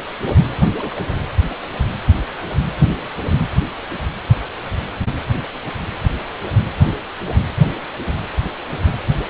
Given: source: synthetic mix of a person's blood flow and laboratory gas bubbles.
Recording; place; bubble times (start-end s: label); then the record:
Doppler ultrasound of blood flow; precordium
0.78-1.17 s: bubbles
From the record:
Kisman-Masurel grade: 121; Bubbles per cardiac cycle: 1 to 2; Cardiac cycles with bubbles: 10 to 50%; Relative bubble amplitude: barely perceptible (0.100 to 0.250); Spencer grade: 2 (many but less than half of the cardiac periods contain bubble signals, singularly or in groups); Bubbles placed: anywhere in the cardiac cycle